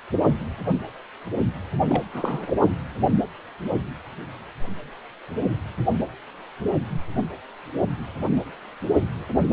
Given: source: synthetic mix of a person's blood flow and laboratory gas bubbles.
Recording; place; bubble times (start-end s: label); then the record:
Doppler ultrasound of blood flow; precordium
1.88-2.04 s: bubbles
2.13-2.51 s: bubbles
From the record:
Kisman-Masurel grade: 211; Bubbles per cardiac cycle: several, 3 to 8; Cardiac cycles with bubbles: 1 to 10%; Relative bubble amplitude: barely perceptible (0.100 to 0.250); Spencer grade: 1 (occasional bubble signal discernible with the cardiac motion signal, with majority of cardiac periods free of bubbles); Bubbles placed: only in the low amplitude regions of the cardiac cycle